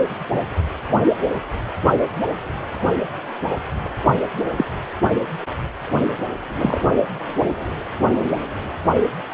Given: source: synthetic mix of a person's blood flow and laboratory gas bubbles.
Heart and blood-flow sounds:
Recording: Doppler ultrasound of blood flow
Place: precordium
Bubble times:
3.84-3.89 s: bubbles
4.56-4.64 s: bubbles
6.61-6.80 s: bubbles
From the record:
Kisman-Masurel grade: 123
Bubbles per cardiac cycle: 1 to 2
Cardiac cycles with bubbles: 10 to 50%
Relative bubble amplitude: loud (0.450 to 0.775)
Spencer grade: 2 (many but less than half of the cardiac periods contain bubble signals, singularly or in groups)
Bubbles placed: anywhere in the cardiac cycle

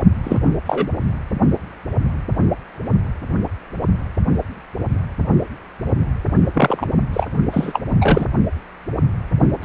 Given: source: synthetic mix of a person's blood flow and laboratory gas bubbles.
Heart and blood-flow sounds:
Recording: Doppler ultrasound of blood flow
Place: precordium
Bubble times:
0.23-0.39 s: bubbles
0.66-0.89 s: bubbles
6.54-6.86 s: bubbles
7.13-7.26 s: bubbles
7.51-7.80 s: bubbles
7.90-7.97 s: bubbles
8.00-8.25 s: bubbles
9.62-9.64 s: bubbles
From the record:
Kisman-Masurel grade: 223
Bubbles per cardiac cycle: several, 3 to 8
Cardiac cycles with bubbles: 10 to 50%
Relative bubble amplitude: loud (0.450 to 0.775)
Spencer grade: 2 (many but less than half of the cardiac periods contain bubble signals, singularly or in groups)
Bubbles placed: only in the low amplitude regions of the cardiac cycle

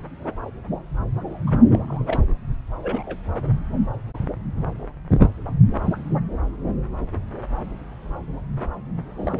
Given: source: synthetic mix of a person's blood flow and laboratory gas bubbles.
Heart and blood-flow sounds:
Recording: Doppler ultrasound of blood flow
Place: subclavian vein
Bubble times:
1.47-1.51 s: bubbles
1.71-1.79 s: bubbles
1.88-2.34 s: bubbles
2.82-3.17 s: bubbles
9.20-9.40 s: bubbles
From the record:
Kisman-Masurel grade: 221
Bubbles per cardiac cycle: several, 3 to 8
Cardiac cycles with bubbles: 10 to 50%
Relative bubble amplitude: barely perceptible (0.100 to 0.250)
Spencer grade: 2 (many but less than half of the cardiac periods contain bubble signals, singularly or in groups)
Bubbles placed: anywhere in the cardiac cycle

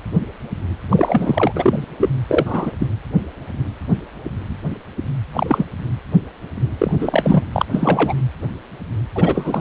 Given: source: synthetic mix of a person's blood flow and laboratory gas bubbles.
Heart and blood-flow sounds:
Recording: Doppler ultrasound of blood flow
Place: precordium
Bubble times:
0.90-1.52 s: bubbles
1.55-1.84 s: bubbles
2.00-2.09 s: bubbles
2.28-2.73 s: bubbles
2.79-2.87 s: bubbles
5.33-5.67 s: bubbles
6.78-6.92 s: bubbles
6.99-7.43 s: bubbles
7.53-7.66 s: bubbles
7.71-8.14 s: bubbles
9.15-9.61 s: bubbles
From the record:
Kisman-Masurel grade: 233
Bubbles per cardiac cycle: several, 3 to 8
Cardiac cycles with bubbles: 50 to 99%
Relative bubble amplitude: loud (0.450 to 0.775)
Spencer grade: 3 (all of the cardiac periods contain showers or single bubble signals, but not dominating or overriding the cardiac motion signals)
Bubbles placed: anywhere in the cardiac cycle

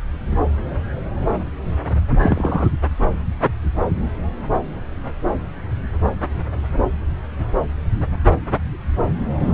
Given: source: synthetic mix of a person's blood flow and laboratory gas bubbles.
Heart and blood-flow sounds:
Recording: Doppler ultrasound of blood flow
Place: subclavian vein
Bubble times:
2.22-2.69 s: bubbles
9.39-9.54 s: bubbles
From the record:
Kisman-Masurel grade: 123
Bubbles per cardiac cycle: 1 to 2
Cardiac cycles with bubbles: 10 to 50%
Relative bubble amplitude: loud (0.450 to 0.775)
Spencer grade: 2 (many but less than half of the cardiac periods contain bubble signals, singularly or in groups)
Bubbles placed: anywhere in the cardiac cycle

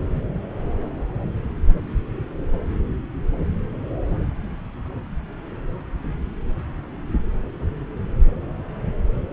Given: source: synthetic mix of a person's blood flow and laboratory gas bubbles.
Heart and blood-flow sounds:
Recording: Doppler ultrasound of blood flow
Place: subclavian vein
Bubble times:
no bubbles
From the record:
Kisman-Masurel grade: 000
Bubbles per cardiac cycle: 0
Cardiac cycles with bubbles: 0%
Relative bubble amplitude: no bubbles discernible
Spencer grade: 0 (complete lack of bubble signals)

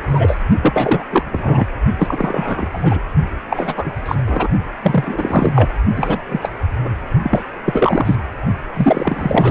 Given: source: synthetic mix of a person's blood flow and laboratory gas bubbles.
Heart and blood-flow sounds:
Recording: Doppler ultrasound of blood flow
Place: precordium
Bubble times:
0.00-0.38 s: bubbles
0.61-1.04 s: bubbles
1.10-1.23 s: bubbles
1.31-1.66 s: bubbles
1.99-2.67 s: bubbles
2.71-2.98 s: bubbles
3.49-3.92 s: bubbles
4.05-4.16 s: bubbles
4.26-4.48 s: bubbles
4.82-5.70 s: bubbles
5.96-6.21 s: bubbles
6.29-6.49 s: bubbles
6.84-6.89 s: bubbles
7.23-7.43 s: bubbles
7.65-8.15 s: bubbles
8.76-9.51 s: bubbles
From the record:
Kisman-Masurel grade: 343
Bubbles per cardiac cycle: rolling drumbeat, 9 or more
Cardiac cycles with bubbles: 100%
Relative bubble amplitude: loud (0.450 to 0.775)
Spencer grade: 3 (all of the cardiac periods contain showers or single bubble signals, but not dominating or overriding the cardiac motion signals)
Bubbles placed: only in the low amplitude regions of the cardiac cycle

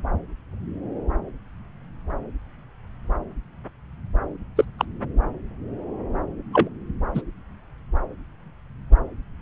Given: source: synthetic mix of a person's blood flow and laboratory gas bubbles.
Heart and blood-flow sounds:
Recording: Doppler ultrasound of blood flow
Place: subclavian vein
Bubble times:
4.57-4.65 s: bubbles
4.79-4.85 s: bubbles
6.53-6.69 s: bubbles
7.14-7.21 s: bubbles
From the record:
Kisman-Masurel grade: 122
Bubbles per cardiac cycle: 1 to 2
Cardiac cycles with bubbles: 10 to 50%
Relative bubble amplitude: moderate (0.250 to 0.450)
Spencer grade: 2 (many but less than half of the cardiac periods contain bubble signals, singularly or in groups)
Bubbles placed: anywhere in the cardiac cycle

